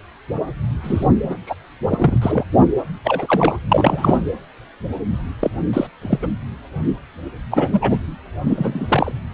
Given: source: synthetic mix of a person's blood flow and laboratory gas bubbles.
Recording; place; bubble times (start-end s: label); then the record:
Doppler ultrasound of blood flow; precordium
0.83-1.07 s: bubbles
1.23-1.38 s: bubbles
1.46-1.55 s: bubbles
1.90-2.18 s: bubbles
2.21-2.44 s: bubbles
3.04-3.58 s: bubbles
3.69-4.23 s: bubbles
5.40-5.50 s: bubbles
5.73-5.87 s: bubbles
6.02-6.19 s: bubbles
6.22-6.28 s: bubbles
7.50-8.00 s: bubbles
8.46-9.12 s: bubbles
From the record:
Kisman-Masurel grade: 233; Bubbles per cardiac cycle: several, 3 to 8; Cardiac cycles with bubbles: 50 to 99%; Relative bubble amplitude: loud (0.450 to 0.775); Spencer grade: 3 (all of the cardiac periods contain showers or single bubble signals, but not dominating or overriding the cardiac motion signals); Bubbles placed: anywhere in the cardiac cycle